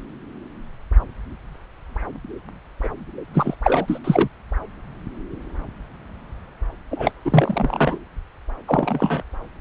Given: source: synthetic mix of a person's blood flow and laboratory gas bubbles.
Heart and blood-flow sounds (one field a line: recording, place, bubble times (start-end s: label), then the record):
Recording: Doppler ultrasound of blood flow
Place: subclavian vein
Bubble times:
2.83-2.88 s: bubbles
3.33-3.55 s: bubbles
3.63-3.99 s: bubbles
4.04-4.29 s: bubbles
6.91-7.12 s: bubbles
7.25-7.98 s: bubbles
8.67-9.22 s: bubbles
From the record:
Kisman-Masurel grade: 233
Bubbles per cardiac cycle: several, 3 to 8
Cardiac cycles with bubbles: 50 to 99%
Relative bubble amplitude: loud (0.450 to 0.775)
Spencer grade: 3 (all of the cardiac periods contain showers or single bubble signals, but not dominating or overriding the cardiac motion signals)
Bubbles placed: anywhere in the cardiac cycle